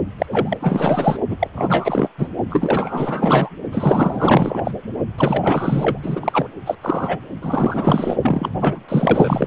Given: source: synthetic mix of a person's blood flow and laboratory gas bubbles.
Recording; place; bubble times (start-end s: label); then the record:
Doppler ultrasound of blood flow; precordium
0.18-0.58 s: bubbles
0.60-1.17 s: bubbles
1.28-1.48 s: bubbles
1.56-2.10 s: bubbles
2.18-2.28 s: bubbles
2.49-3.49 s: bubbles
3.71-4.71 s: bubbles
5.17-5.98 s: bubbles
6.03-6.48 s: bubbles
6.66-6.75 s: bubbles
6.81-7.19 s: bubbles
7.42-8.16 s: bubbles
8.22-8.51 s: bubbles
8.59-8.81 s: bubbles
8.88-9.47 s: bubbles
From the record:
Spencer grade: 4 (maximum detectable bubble signal sounding continuously throughout systole and diastole of every cardiac period, and overriding the amplitude of the normal cardiac signals); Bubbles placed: only in the low amplitude regions of the cardiac cycle